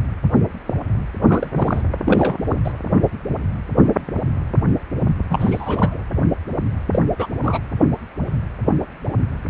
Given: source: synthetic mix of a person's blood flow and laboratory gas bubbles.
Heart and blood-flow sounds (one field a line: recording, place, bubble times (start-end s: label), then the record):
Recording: Doppler ultrasound of blood flow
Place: precordium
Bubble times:
1.27-1.49 s: bubbles
1.55-1.83 s: bubbles
2.05-2.58 s: bubbles
2.64-2.73 s: bubbles
5.29-5.99 s: bubbles
6.92-6.99 s: bubbles
7.19-7.27 s: bubbles
7.42-7.60 s: bubbles
From the record:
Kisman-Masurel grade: 222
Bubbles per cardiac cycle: several, 3 to 8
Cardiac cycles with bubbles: 10 to 50%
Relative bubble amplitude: moderate (0.250 to 0.450)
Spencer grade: 2 (many but less than half of the cardiac periods contain bubble signals, singularly or in groups)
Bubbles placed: anywhere in the cardiac cycle